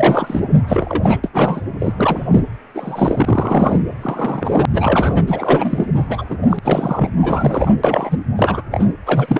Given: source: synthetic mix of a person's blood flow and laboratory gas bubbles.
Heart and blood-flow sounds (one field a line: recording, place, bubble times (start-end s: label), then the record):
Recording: Doppler ultrasound of blood flow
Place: precordium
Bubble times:
0.00-0.45 s: bubbles
0.68-1.20 s: bubbles
1.23-1.29 s: bubbles
1.33-1.61 s: bubbles
1.79-1.94 s: bubbles
1.97-2.25 s: bubbles
2.31-2.43 s: bubbles
2.75-3.80 s: bubbles
4.01-4.66 s: bubbles
4.71-5.85 s: bubbles
5.95-6.04 s: bubbles
6.09-6.25 s: bubbles
6.29-6.37 s: bubbles
6.42-6.59 s: bubbles
6.62-7.09 s: bubbles
7.21-7.71 s: bubbles
7.83-8.18 s: bubbles
8.36-8.62 s: bubbles
8.71-8.85 s: bubbles
9.06-9.40 s: bubbles
From the record:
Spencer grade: 3 (all of the cardiac periods contain showers or single bubble signals, but not dominating or overriding the cardiac motion signals)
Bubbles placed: anywhere in the cardiac cycle